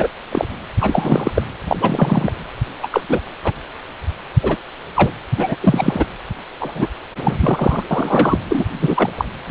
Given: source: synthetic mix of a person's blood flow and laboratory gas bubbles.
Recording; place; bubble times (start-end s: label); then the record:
Doppler ultrasound of blood flow; precordium
0.00-0.07 s: bubbles
0.31-0.47 s: bubbles
0.80-1.32 s: bubbles
1.34-1.42 s: bubbles
1.68-1.77 s: bubbles
1.80-2.32 s: bubbles
2.82-2.87 s: bubbles
2.90-3.01 s: bubbles
3.08-3.20 s: bubbles
3.44-3.52 s: bubbles
4.42-4.56 s: bubbles
4.96-5.11 s: bubbles
5.37-5.56 s: bubbles
5.60-6.06 s: bubbles
6.60-6.87 s: bubbles
7.16-7.83 s: bubbles
7.90-8.40 s: bubbles
8.49-8.64 s: bubbles
8.80-9.10 s: bubbles
9.17-9.25 s: bubbles
9.46-9.51 s: bubbles
From the record:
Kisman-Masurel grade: 233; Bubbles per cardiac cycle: several, 3 to 8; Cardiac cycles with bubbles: 50 to 99%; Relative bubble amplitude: loud (0.450 to 0.775); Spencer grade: 3 (all of the cardiac periods contain showers or single bubble signals, but not dominating or overriding the cardiac motion signals); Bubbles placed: anywhere in the cardiac cycle